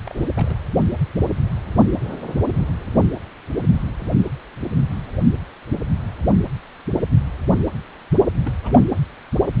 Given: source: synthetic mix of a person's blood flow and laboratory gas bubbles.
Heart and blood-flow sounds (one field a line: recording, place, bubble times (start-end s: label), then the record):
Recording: Doppler ultrasound of blood flow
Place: precordium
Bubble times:
0.06-0.29 s: bubbles
0.35-0.60 s: bubbles
8.45-8.53 s: bubbles
8.64-8.83 s: bubbles
From the record:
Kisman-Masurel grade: 221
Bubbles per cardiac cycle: several, 3 to 8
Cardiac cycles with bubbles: 10 to 50%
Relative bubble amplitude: barely perceptible (0.100 to 0.250)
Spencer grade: 2 (many but less than half of the cardiac periods contain bubble signals, singularly or in groups)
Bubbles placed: anywhere in the cardiac cycle